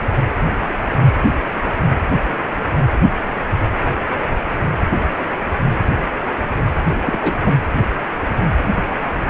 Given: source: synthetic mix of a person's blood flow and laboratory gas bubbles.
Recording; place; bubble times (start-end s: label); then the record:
Doppler ultrasound of blood flow; precordium
6.86-6.99 s: bubbles
7.04-7.18 s: bubbles
7.21-7.33 s: bubbles
7.43-7.55 s: bubbles
From the record:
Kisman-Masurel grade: 212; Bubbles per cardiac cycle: several, 3 to 8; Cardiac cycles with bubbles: 1 to 10%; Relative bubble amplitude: moderate (0.250 to 0.450); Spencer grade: 1 (occasional bubble signal discernible with the cardiac motion signal, with majority of cardiac periods free of bubbles); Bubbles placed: anywhere in the cardiac cycle